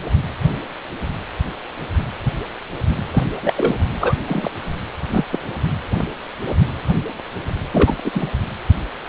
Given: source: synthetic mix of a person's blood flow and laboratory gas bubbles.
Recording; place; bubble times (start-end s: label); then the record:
Doppler ultrasound of blood flow; precordium
3.13-3.26 s: bubbles
3.42-3.53 s: bubbles
3.56-3.75 s: bubbles
4.00-4.14 s: bubbles
4.26-4.50 s: bubbles
5.11-5.25 s: bubbles
5.30-5.38 s: bubbles
7.73-7.95 s: bubbles
8.04-8.11 s: bubbles
8.14-8.29 s: bubbles
From the record:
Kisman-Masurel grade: 223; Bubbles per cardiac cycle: several, 3 to 8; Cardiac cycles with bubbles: 10 to 50%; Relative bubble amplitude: loud (0.450 to 0.775); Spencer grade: 2 (many but less than half of the cardiac periods contain bubble signals, singularly or in groups); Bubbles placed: anywhere in the cardiac cycle